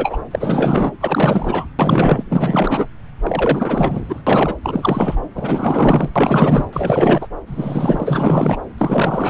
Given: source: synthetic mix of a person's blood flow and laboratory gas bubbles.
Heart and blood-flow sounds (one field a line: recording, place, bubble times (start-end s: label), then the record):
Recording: Doppler ultrasound of blood flow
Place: subclavian vein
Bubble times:
0.00-0.18 s: bubbles
0.30-0.91 s: bubbles
1.01-1.67 s: bubbles
1.79-2.24 s: bubbles
2.29-2.87 s: bubbles
3.21-4.21 s: bubbles
4.26-4.54 s: bubbles
4.63-5.18 s: bubbles
5.35-6.64 s: bubbles
6.72-7.27 s: bubbles
7.46-8.58 s: bubbles
8.78-9.30 s: bubbles
From the record:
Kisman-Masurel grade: 444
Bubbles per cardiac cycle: continuous sound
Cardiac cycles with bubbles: 100%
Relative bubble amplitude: maximal (0.775 to 0.999)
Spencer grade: 4 (maximum detectable bubble signal sounding continuously throughout systole and diastole of every cardiac period, and overriding the amplitude of the normal cardiac signals)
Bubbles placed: anywhere in the cardiac cycle